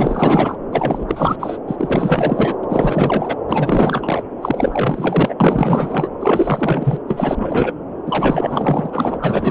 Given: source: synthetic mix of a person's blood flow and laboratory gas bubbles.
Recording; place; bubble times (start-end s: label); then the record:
Doppler ultrasound of blood flow; subclavian vein
0.00-0.57 s: bubbles
0.72-1.05 s: bubbles
1.08-1.36 s: bubbles
1.40-1.58 s: bubbles
1.67-2.56 s: bubbles
2.63-2.66 s: bubbles
2.69-3.37 s: bubbles
3.48-4.23 s: bubbles
4.42-5.35 s: bubbles
5.40-6.09 s: bubbles
6.20-6.99 s: bubbles
7.08-7.73 s: bubbles
8.06-9.19 s: bubbles
9.21-9.51 s: bubbles
From the record:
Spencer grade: 4 (maximum detectable bubble signal sounding continuously throughout systole and diastole of every cardiac period, and overriding the amplitude of the normal cardiac signals); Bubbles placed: anywhere in the cardiac cycle